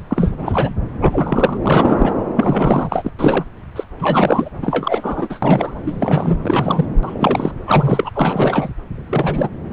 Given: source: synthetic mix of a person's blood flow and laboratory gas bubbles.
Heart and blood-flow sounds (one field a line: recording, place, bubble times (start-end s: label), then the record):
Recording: Doppler ultrasound of blood flow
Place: subclavian vein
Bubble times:
0.08-0.73 s: bubbles
1.01-1.57 s: bubbles
1.63-2.15 s: bubbles
2.36-3.11 s: bubbles
3.18-3.44 s: bubbles
3.75-3.84 s: bubbles
3.99-4.49 s: bubbles
4.61-5.82 s: bubbles
5.85-6.37 s: bubbles
6.41-6.85 s: bubbles
7.03-7.51 s: bubbles
7.66-8.11 s: bubbles
8.13-8.70 s: bubbles
8.95-9.49 s: bubbles
9.70-9.73 s: bubbles
From the record:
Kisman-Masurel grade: 343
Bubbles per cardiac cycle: rolling drumbeat, 9 or more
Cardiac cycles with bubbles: 100%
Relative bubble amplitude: loud (0.450 to 0.775)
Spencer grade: 3 (all of the cardiac periods contain showers or single bubble signals, but not dominating or overriding the cardiac motion signals)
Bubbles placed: anywhere in the cardiac cycle